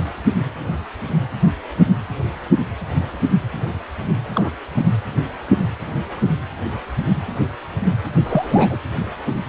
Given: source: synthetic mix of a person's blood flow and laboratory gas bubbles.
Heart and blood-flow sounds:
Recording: Doppler ultrasound of blood flow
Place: precordium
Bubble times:
4.34-4.51 s: bubbles
4.75-4.84 s: bubbles
8.24-8.78 s: bubbles
From the record:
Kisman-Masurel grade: 222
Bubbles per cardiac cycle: several, 3 to 8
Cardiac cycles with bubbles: 10 to 50%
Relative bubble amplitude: moderate (0.250 to 0.450)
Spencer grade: 2 (many but less than half of the cardiac periods contain bubble signals, singularly or in groups)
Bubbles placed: anywhere in the cardiac cycle

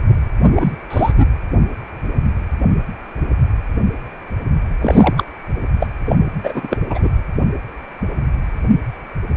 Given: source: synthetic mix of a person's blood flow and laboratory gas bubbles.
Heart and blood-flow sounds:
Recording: Doppler ultrasound of blood flow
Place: precordium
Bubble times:
0.46-0.72 s: bubbles
0.90-1.12 s: bubbles
1.18-1.27 s: bubbles
4.81-5.24 s: bubbles
5.79-5.88 s: bubbles
6.05-6.16 s: bubbles
6.43-6.77 s: bubbles
6.90-7.08 s: bubbles
From the record:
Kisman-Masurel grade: 223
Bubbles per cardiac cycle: several, 3 to 8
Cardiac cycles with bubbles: 10 to 50%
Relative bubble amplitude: loud (0.450 to 0.775)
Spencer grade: 2 (many but less than half of the cardiac periods contain bubble signals, singularly or in groups)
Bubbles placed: anywhere in the cardiac cycle

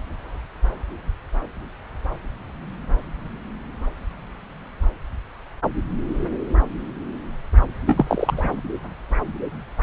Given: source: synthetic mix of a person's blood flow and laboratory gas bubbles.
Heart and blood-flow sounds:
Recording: Doppler ultrasound of blood flow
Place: subclavian vein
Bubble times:
7.85-8.05 s: bubbles
8.08-8.55 s: bubbles
From the record:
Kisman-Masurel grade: 213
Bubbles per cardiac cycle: several, 3 to 8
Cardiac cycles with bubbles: 1 to 10%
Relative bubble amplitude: loud (0.450 to 0.775)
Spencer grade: 1 (occasional bubble signal discernible with the cardiac motion signal, with majority of cardiac periods free of bubbles)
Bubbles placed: anywhere in the cardiac cycle

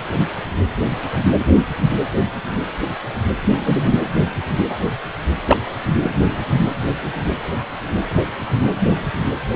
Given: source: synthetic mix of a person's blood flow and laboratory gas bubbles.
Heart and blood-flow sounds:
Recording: Doppler ultrasound of blood flow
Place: precordium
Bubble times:
3.42-3.95 s: bubbles
5.46-5.57 s: bubbles
6.02-6.11 s: bubbles
From the record:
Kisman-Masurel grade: 123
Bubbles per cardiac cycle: 1 to 2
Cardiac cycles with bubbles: 10 to 50%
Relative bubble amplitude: loud (0.450 to 0.775)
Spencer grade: 2 (many but less than half of the cardiac periods contain bubble signals, singularly or in groups)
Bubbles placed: anywhere in the cardiac cycle

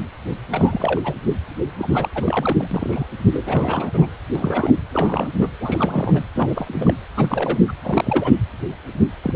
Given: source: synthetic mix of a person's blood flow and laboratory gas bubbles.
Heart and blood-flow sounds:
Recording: Doppler ultrasound of blood flow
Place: precordium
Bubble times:
0.51-1.01 s: bubbles
1.04-1.15 s: bubbles
1.78-2.08 s: bubbles
2.15-2.69 s: bubbles
2.71-3.06 s: bubbles
3.31-4.06 s: bubbles
4.35-4.71 s: bubbles
4.92-5.28 s: bubbles
5.34-5.48 s: bubbles
5.60-6.24 s: bubbles
6.34-6.94 s: bubbles
7.17-7.58 s: bubbles
7.67-7.73 s: bubbles
7.83-8.34 s: bubbles
9.22-9.36 s: bubbles
From the record:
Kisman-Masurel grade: 332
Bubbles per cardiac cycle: rolling drumbeat, 9 or more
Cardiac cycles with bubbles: 50 to 99%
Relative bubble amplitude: moderate (0.250 to 0.450)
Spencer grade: 3 (all of the cardiac periods contain showers or single bubble signals, but not dominating or overriding the cardiac motion signals)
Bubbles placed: anywhere in the cardiac cycle

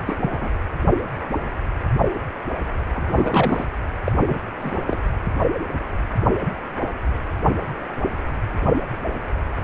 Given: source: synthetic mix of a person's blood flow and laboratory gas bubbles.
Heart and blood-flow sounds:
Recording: Doppler ultrasound of blood flow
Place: precordium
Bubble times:
0.05-0.18 s: bubbles
0.21-0.49 s: bubbles
2.94-3.65 s: bubbles
4.04-4.12 s: bubbles
4.28-4.36 s: bubbles
4.61-4.79 s: bubbles
4.87-5.01 s: bubbles
From the record:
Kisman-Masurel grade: 222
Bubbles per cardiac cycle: several, 3 to 8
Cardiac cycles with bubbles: 10 to 50%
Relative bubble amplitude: moderate (0.250 to 0.450)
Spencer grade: 2 (many but less than half of the cardiac periods contain bubble signals, singularly or in groups)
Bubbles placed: anywhere in the cardiac cycle

